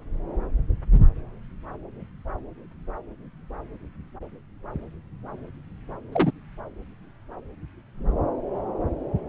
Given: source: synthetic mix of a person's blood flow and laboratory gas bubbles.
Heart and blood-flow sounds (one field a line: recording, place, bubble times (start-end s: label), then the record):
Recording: Doppler ultrasound of blood flow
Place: subclavian vein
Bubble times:
6.12-6.32 s: bubbles
From the record:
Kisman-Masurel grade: 122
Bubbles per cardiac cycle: 1 to 2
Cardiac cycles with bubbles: 10 to 50%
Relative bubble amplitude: moderate (0.250 to 0.450)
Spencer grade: 2 (many but less than half of the cardiac periods contain bubble signals, singularly or in groups)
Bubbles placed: anywhere in the cardiac cycle